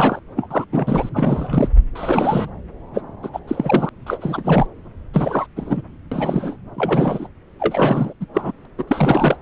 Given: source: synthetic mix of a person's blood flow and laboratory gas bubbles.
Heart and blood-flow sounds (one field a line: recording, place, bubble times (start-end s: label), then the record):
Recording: Doppler ultrasound of blood flow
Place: subclavian vein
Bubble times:
0.00-0.19 s: bubbles
0.37-0.48 s: bubbles
0.50-0.65 s: bubbles
0.72-1.09 s: bubbles
1.14-1.69 s: bubbles
1.95-2.50 s: bubbles
2.94-3.02 s: bubbles
3.23-3.29 s: bubbles
3.33-3.40 s: bubbles
3.47-3.89 s: bubbles
4.06-4.17 s: bubbles
4.21-4.67 s: bubbles
5.13-5.46 s: bubbles
5.55-5.81 s: bubbles
6.11-6.56 s: bubbles
6.75-7.27 s: bubbles
7.59-8.13 s: bubbles
8.20-8.26 s: bubbles
8.34-8.52 s: bubbles
8.78-8.84 s: bubbles
8.88-9.37 s: bubbles
From the record:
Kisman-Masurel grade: 342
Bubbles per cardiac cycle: rolling drumbeat, 9 or more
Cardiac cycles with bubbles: 100%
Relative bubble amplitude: moderate (0.250 to 0.450)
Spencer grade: 3 (all of the cardiac periods contain showers or single bubble signals, but not dominating or overriding the cardiac motion signals)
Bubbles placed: anywhere in the cardiac cycle